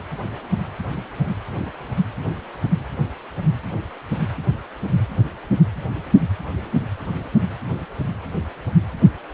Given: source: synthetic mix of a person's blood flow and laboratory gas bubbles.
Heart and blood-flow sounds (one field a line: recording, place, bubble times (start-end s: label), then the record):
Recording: Doppler ultrasound of blood flow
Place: precordium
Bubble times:
no bubbles
From the record:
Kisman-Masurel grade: 000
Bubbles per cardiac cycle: 0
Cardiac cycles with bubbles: 0%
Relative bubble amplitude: no bubbles discernible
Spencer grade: 0 (complete lack of bubble signals)